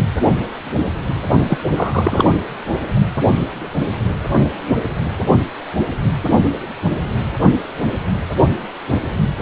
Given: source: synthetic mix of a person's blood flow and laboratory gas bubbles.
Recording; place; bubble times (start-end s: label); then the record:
Doppler ultrasound of blood flow; precordium
1.47-1.57 s: bubbles
1.76-2.25 s: bubbles
From the record:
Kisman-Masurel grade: 213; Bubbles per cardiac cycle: several, 3 to 8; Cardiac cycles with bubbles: 1 to 10%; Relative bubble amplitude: loud (0.450 to 0.775); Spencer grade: 1 (occasional bubble signal discernible with the cardiac motion signal, with majority of cardiac periods free of bubbles); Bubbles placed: only in the low amplitude regions of the cardiac cycle